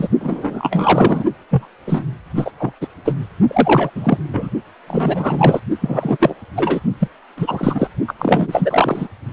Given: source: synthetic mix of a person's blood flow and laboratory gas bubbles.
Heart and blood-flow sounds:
Doppler ultrasound of blood flow; precordium
0.00-0.08 s: bubbles
0.21-1.24 s: bubbles
1.51-1.66 s: bubbles
1.86-2.04 s: bubbles
2.35-2.51 s: bubbles
2.58-2.73 s: bubbles
2.81-2.88 s: bubbles
3.05-3.15 s: bubbles
3.48-3.90 s: bubbles
3.95-4.18 s: bubbles
4.33-4.49 s: bubbles
4.88-5.60 s: bubbles
5.80-6.35 s: bubbles
6.55-6.80 s: bubbles
6.99-7.07 s: bubbles
7.36-7.88 s: bubbles
8.07-8.13 s: bubbles
8.18-9.08 s: bubbles
From the record:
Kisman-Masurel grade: 343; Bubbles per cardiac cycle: rolling drumbeat, 9 or more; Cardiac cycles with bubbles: 100%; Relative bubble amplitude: loud (0.450 to 0.775); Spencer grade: 3 (all of the cardiac periods contain showers or single bubble signals, but not dominating or overriding the cardiac motion signals); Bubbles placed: only in the low amplitude regions of the cardiac cycle

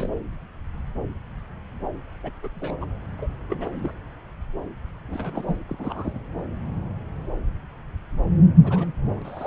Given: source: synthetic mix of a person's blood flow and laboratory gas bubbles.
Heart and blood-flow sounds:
Doppler ultrasound of blood flow; subclavian vein
0.00-0.09 s: bubbles
2.23-2.31 s: bubbles
2.42-2.48 s: bubbles
2.56-2.76 s: bubbles
2.80-2.85 s: bubbles
3.18-3.27 s: bubbles
3.49-3.69 s: bubbles
3.72-3.91 s: bubbles
5.07-5.57 s: bubbles
5.69-5.77 s: bubbles
5.79-6.18 s: bubbles
8.64-8.86 s: bubbles
9.16-9.47 s: bubbles
From the record:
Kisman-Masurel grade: 221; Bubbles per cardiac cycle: several, 3 to 8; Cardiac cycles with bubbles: 10 to 50%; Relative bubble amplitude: barely perceptible (0.100 to 0.250); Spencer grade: 2 (many but less than half of the cardiac periods contain bubble signals, singularly or in groups); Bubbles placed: anywhere in the cardiac cycle

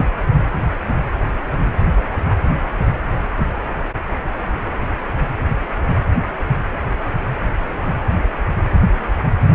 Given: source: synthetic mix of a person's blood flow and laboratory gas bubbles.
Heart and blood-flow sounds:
Doppler ultrasound of blood flow; precordium
no bubbles
From the record:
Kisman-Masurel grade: 000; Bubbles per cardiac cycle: 0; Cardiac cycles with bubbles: 0%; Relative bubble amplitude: no bubbles discernible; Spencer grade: 0 (complete lack of bubble signals)

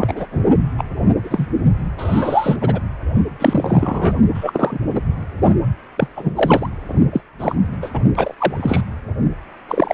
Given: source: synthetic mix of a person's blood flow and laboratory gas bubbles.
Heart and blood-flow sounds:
Doppler ultrasound of blood flow; precordium
0.00-0.26 s: bubbles
0.32-0.42 s: bubbles
0.78-0.83 s: bubbles
1.23-1.47 s: bubbles
1.98-2.56 s: bubbles
2.60-2.80 s: bubbles
3.40-4.16 s: bubbles
4.34-4.79 s: bubbles
4.95-4.99 s: bubbles
5.97-6.08 s: bubbles
6.16-6.69 s: bubbles
7.12-7.21 s: bubbles
7.39-7.56 s: bubbles
7.82-7.90 s: bubbles
7.93-8.00 s: bubbles
8.15-8.34 s: bubbles
8.37-8.81 s: bubbles
9.68-9.94 s: bubbles
From the record:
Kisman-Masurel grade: 243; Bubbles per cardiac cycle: several, 3 to 8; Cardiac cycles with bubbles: 100%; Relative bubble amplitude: loud (0.450 to 0.775); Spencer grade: 3 (all of the cardiac periods contain showers or single bubble signals, but not dominating or overriding the cardiac motion signals); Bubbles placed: only in the low amplitude regions of the cardiac cycle

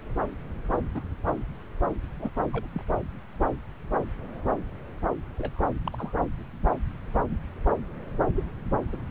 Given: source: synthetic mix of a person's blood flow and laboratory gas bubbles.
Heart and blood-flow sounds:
Doppler ultrasound of blood flow; subclavian vein
0.70-0.77 s: bubbles
0.95-1.08 s: bubbles
1.26-1.33 s: bubbles
2.19-2.30 s: bubbles
2.52-2.68 s: bubbles
2.73-2.83 s: bubbles
5.37-5.62 s: bubbles
5.86-5.90 s: bubbles
5.92-6.13 s: bubbles
8.35-8.44 s: bubbles
8.88-9.09 s: bubbles
From the record:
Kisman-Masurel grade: 121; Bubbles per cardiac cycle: 1 to 2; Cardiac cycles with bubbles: 10 to 50%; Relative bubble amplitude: barely perceptible (0.100 to 0.250); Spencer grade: 2 (many but less than half of the cardiac periods contain bubble signals, singularly or in groups); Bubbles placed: anywhere in the cardiac cycle

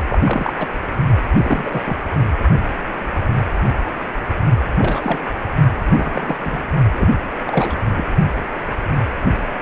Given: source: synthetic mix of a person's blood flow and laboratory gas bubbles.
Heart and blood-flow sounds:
Doppler ultrasound of blood flow; precordium
0.08-0.18 s: bubbles
0.23-0.53 s: bubbles
0.58-0.68 s: bubbles
1.36-1.82 s: bubbles
1.86-1.97 s: bubbles
2.17-2.26 s: bubbles
4.75-5.19 s: bubbles
5.87-6.38 s: bubbles
6.41-6.62 s: bubbles
6.92-7.08 s: bubbles
7.47-7.77 s: bubbles
7.97-8.05 s: bubbles
From the record:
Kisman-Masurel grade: 232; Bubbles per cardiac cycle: several, 3 to 8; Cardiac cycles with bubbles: 50 to 99%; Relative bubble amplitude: moderate (0.250 to 0.450); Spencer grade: 3 (all of the cardiac periods contain showers or single bubble signals, but not dominating or overriding the cardiac motion signals); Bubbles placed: only in the low amplitude regions of the cardiac cycle

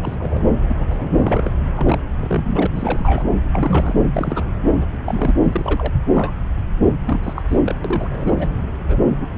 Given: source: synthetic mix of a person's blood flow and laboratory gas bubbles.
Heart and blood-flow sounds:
Doppler ultrasound of blood flow; subclavian vein
0.02-0.15 s: bubbles
0.18-0.43 s: bubbles
0.69-0.86 s: bubbles
0.90-1.51 s: bubbles
1.77-1.98 s: bubbles
2.18-2.67 s: bubbles
2.75-3.29 s: bubbles
3.52-3.95 s: bubbles
4.13-4.45 s: bubbles
4.80-4.85 s: bubbles
4.92-4.98 s: bubbles
5.04-5.32 s: bubbles
5.43-5.93 s: bubbles
6.12-6.32 s: bubbles
7.05-7.20 s: bubbles
7.23-7.42 s: bubbles
7.48-7.60 s: bubbles
7.63-7.75 s: bubbles
7.84-8.08 s: bubbles
8.10-8.54 s: bubbles
8.88-9.04 s: bubbles
9.20-9.30 s: bubbles
From the record:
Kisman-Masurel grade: 242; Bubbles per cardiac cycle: several, 3 to 8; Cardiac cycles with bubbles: 100%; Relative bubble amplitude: moderate (0.250 to 0.450); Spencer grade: 3 (all of the cardiac periods contain showers or single bubble signals, but not dominating or overriding the cardiac motion signals); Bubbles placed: anywhere in the cardiac cycle

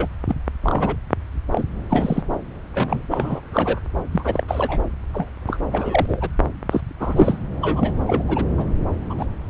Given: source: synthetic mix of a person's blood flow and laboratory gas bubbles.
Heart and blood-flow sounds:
Doppler ultrasound of blood flow; subclavian vein
0.00-0.08 s: bubbles
0.28-0.35 s: bubbles
0.63-0.96 s: bubbles
1.52-1.65 s: bubbles
1.89-2.22 s: bubbles
2.72-3.06 s: bubbles
3.10-3.40 s: bubbles
3.52-3.79 s: bubbles
4.11-4.44 s: bubbles
4.48-4.81 s: bubbles
5.14-5.28 s: bubbles
5.47-5.57 s: bubbles
5.70-6.30 s: bubbles
6.70-6.81 s: bubbles
7.00-7.39 s: bubbles
7.61-7.94 s: bubbles
8.06-8.24 s: bubbles
8.28-8.45 s: bubbles
8.57-8.67 s: bubbles
9.10-9.14 s: bubbles
9.18-9.26 s: bubbles
From the record:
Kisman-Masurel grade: 243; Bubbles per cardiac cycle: several, 3 to 8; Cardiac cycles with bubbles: 100%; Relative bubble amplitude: loud (0.450 to 0.775); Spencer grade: 3 (all of the cardiac periods contain showers or single bubble signals, but not dominating or overriding the cardiac motion signals); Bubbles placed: anywhere in the cardiac cycle

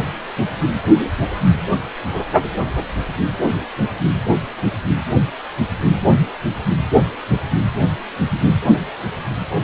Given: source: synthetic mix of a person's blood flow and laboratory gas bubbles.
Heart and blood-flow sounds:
Doppler ultrasound of blood flow; precordium
no bubbles
From the record:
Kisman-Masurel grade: 000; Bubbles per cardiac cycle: 0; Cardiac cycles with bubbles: 0%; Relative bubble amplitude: no bubbles discernible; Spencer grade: 0 (complete lack of bubble signals)

